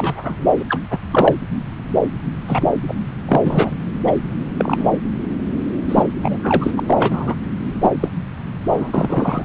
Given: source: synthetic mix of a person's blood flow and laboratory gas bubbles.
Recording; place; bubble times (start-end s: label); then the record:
Doppler ultrasound of blood flow; subclavian vein
0.00-0.45 s: bubbles
0.58-0.65 s: bubbles
0.69-0.81 s: bubbles
0.90-0.98 s: bubbles
1.11-1.35 s: bubbles
2.47-2.67 s: bubbles
2.88-2.94 s: bubbles
3.27-3.40 s: bubbles
3.44-3.73 s: bubbles
4.07-4.13 s: bubbles
4.58-4.90 s: bubbles
5.89-6.04 s: bubbles
6.23-6.38 s: bubbles
6.43-6.71 s: bubbles
6.76-6.80 s: bubbles
6.86-7.35 s: bubbles
7.81-7.91 s: bubbles
8.00-8.08 s: bubbles
8.71-8.91 s: bubbles
8.94-9.45 s: bubbles
From the record:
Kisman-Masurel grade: 233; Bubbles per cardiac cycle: several, 3 to 8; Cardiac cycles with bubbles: 50 to 99%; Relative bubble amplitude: loud (0.450 to 0.775); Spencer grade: 3 (all of the cardiac periods contain showers or single bubble signals, but not dominating or overriding the cardiac motion signals); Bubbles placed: anywhere in the cardiac cycle